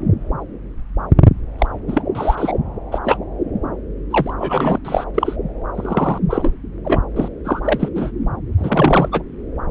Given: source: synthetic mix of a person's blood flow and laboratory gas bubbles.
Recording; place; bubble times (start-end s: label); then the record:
Doppler ultrasound of blood flow; subclavian vein
1.58-1.67 s: bubbles
1.88-2.03 s: bubbles
2.15-2.53 s: bubbles
2.92-2.99 s: bubbles
3.04-3.18 s: bubbles
4.10-4.33 s: bubbles
4.38-4.79 s: bubbles
4.84-5.04 s: bubbles
5.14-5.36 s: bubbles
5.75-6.19 s: bubbles
6.29-6.54 s: bubbles
6.84-7.02 s: bubbles
7.16-7.29 s: bubbles
7.44-7.61 s: bubbles
7.64-7.88 s: bubbles
7.95-8.11 s: bubbles
8.57-9.09 s: bubbles
9.12-9.22 s: bubbles
From the record:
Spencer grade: 3 (all of the cardiac periods contain showers or single bubble signals, but not dominating or overriding the cardiac motion signals); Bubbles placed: anywhere in the cardiac cycle